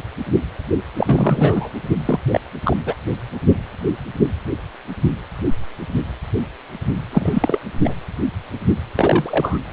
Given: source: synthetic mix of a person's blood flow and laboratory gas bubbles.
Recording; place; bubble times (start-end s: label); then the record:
Doppler ultrasound of blood flow; precordium
0.97-1.70 s: bubbles
2.05-2.19 s: bubbles
2.31-2.40 s: bubbles
2.63-2.77 s: bubbles
2.85-2.95 s: bubbles
7.11-7.59 s: bubbles
7.84-7.94 s: bubbles
8.96-9.59 s: bubbles
From the record:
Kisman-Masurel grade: 223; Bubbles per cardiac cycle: several, 3 to 8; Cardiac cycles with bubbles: 10 to 50%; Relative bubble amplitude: loud (0.450 to 0.775); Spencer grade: 2 (many but less than half of the cardiac periods contain bubble signals, singularly or in groups); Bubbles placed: anywhere in the cardiac cycle